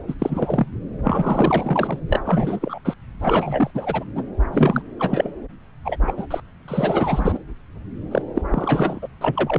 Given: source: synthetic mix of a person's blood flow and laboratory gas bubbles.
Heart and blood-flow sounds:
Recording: Doppler ultrasound of blood flow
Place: subclavian vein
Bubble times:
0.08-0.14 s: bubbles
0.19-0.65 s: bubbles
1.04-1.98 s: bubbles
2.08-2.19 s: bubbles
2.25-2.59 s: bubbles
2.61-2.78 s: bubbles
2.84-2.94 s: bubbles
3.19-3.70 s: bubbles
3.74-4.04 s: bubbles
4.16-4.23 s: bubbles
4.52-4.82 s: bubbles
4.99-5.31 s: bubbles
5.85-5.97 s: bubbles
6.02-6.12 s: bubbles
6.17-6.26 s: bubbles
6.31-6.40 s: bubbles
6.68-7.38 s: bubbles
8.11-8.22 s: bubbles
8.35-8.42 s: bubbles
8.50-9.00 s: bubbles
9.02-9.08 s: bubbles
9.21-9.59 s: bubbles
From the record:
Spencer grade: 3 (all of the cardiac periods contain showers or single bubble signals, but not dominating or overriding the cardiac motion signals)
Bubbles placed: anywhere in the cardiac cycle

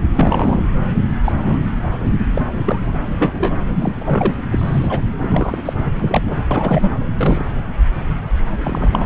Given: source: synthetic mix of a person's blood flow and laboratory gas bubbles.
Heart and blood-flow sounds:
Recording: Doppler ultrasound of blood flow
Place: subclavian vein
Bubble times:
0.14-0.65 s: bubbles
1.25-1.32 s: bubbles
1.39-1.61 s: bubbles
2.33-2.42 s: bubbles
2.53-2.96 s: bubbles
3.19-3.33 s: bubbles
3.38-3.54 s: bubbles
3.75-3.95 s: bubbles
4.00-4.34 s: bubbles
4.51-5.00 s: bubbles
5.19-5.73 s: bubbles
5.96-6.42 s: bubbles
6.50-6.89 s: bubbles
7.18-7.43 s: bubbles
8.63-9.06 s: bubbles
From the record:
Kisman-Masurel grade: 232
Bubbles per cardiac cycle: several, 3 to 8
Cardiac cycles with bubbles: 50 to 99%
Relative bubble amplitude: moderate (0.250 to 0.450)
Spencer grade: 3 (all of the cardiac periods contain showers or single bubble signals, but not dominating or overriding the cardiac motion signals)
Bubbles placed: anywhere in the cardiac cycle

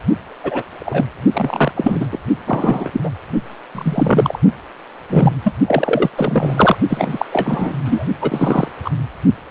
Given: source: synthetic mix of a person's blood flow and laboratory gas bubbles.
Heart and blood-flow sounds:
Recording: Doppler ultrasound of blood flow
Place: precordium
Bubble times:
0.43-0.62 s: bubbles
0.79-1.04 s: bubbles
1.33-1.71 s: bubbles
1.75-2.08 s: bubbles
2.12-2.18 s: bubbles
2.46-3.00 s: bubbles
3.03-3.10 s: bubbles
3.74-4.39 s: bubbles
5.09-5.32 s: bubbles
5.44-5.53 s: bubbles
5.67-6.10 s: bubbles
6.14-6.76 s: bubbles
6.89-7.25 s: bubbles
7.32-7.73 s: bubbles
7.85-8.05 s: bubbles
8.21-8.68 s: bubbles
8.84-8.90 s: bubbles
From the record:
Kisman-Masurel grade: 233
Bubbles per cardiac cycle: several, 3 to 8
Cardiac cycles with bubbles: 50 to 99%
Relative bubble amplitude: loud (0.450 to 0.775)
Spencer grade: 3 (all of the cardiac periods contain showers or single bubble signals, but not dominating or overriding the cardiac motion signals)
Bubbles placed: only in the low amplitude regions of the cardiac cycle

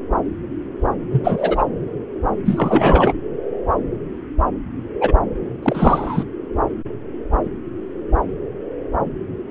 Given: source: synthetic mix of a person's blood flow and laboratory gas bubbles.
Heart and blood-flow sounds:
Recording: Doppler ultrasound of blood flow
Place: subclavian vein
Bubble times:
1.11-1.65 s: bubbles
2.45-3.14 s: bubbles
5.00-5.12 s: bubbles
5.62-6.24 s: bubbles
From the record:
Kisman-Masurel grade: 223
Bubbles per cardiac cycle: several, 3 to 8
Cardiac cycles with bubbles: 10 to 50%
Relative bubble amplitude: loud (0.450 to 0.775)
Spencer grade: 2 (many but less than half of the cardiac periods contain bubble signals, singularly or in groups)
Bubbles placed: anywhere in the cardiac cycle

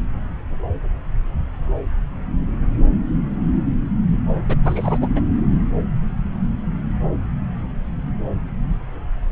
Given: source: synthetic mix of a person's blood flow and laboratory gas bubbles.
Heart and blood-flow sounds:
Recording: Doppler ultrasound of blood flow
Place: subclavian vein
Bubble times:
4.49-4.56 s: bubbles
4.63-5.08 s: bubbles
5.16-5.21 s: bubbles
From the record:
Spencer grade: 1 (occasional bubble signal discernible with the cardiac motion signal, with majority of cardiac periods free of bubbles)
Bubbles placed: anywhere in the cardiac cycle

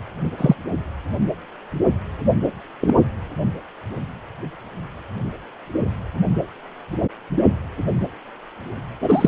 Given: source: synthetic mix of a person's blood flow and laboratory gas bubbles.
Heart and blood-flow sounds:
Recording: Doppler ultrasound of blood flow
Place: precordium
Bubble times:
0.38-0.55 s: bubbles
2.81-2.94 s: bubbles
9.01-9.28 s: bubbles
From the record:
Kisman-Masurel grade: 123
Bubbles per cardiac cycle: 1 to 2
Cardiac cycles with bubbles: 10 to 50%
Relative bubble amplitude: loud (0.450 to 0.775)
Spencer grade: 2 (many but less than half of the cardiac periods contain bubble signals, singularly or in groups)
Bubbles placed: only in the low amplitude regions of the cardiac cycle

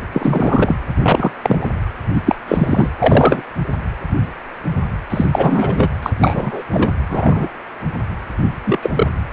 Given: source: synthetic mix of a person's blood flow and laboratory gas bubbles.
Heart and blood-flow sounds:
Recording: Doppler ultrasound of blood flow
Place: precordium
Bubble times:
0.13-0.76 s: bubbles
1.02-1.31 s: bubbles
1.43-1.72 s: bubbles
2.14-2.21 s: bubbles
2.25-2.35 s: bubbles
2.48-2.89 s: bubbles
2.98-3.42 s: bubbles
5.10-5.25 s: bubbles
5.31-5.89 s: bubbles
6.02-6.10 s: bubbles
6.18-6.62 s: bubbles
6.71-6.94 s: bubbles
7.08-7.48 s: bubbles
8.65-8.79 s: bubbles
8.82-8.90 s: bubbles
8.94-9.07 s: bubbles
From the record:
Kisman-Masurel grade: 233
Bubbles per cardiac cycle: several, 3 to 8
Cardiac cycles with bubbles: 50 to 99%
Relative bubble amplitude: loud (0.450 to 0.775)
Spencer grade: 3 (all of the cardiac periods contain showers or single bubble signals, but not dominating or overriding the cardiac motion signals)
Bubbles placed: anywhere in the cardiac cycle

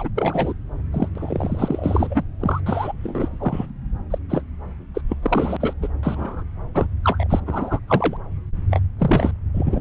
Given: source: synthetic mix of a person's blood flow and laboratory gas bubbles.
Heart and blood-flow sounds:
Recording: Doppler ultrasound of blood flow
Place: subclavian vein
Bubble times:
0.00-0.08 s: bubbles
0.15-0.54 s: bubbles
0.92-1.08 s: bubbles
1.15-2.23 s: bubbles
2.40-2.60 s: bubbles
2.66-2.92 s: bubbles
3.04-3.29 s: bubbles
3.32-3.69 s: bubbles
4.10-4.18 s: bubbles
4.29-4.42 s: bubbles
4.95-5.01 s: bubbles
5.09-5.17 s: bubbles
5.22-5.56 s: bubbles
5.60-5.73 s: bubbles
5.81-5.88 s: bubbles
6.03-6.43 s: bubbles
6.74-6.87 s: bubbles
7.04-7.40 s: bubbles
7.46-7.79 s: bubbles
7.88-8.17 s: bubbles
8.71-8.79 s: bubbles
8.98-9.31 s: bubbles
9.54-9.81 s: bubbles
From the record:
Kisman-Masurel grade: 342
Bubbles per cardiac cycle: rolling drumbeat, 9 or more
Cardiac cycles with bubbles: 100%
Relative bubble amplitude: moderate (0.250 to 0.450)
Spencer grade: 3 (all of the cardiac periods contain showers or single bubble signals, but not dominating or overriding the cardiac motion signals)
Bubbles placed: anywhere in the cardiac cycle

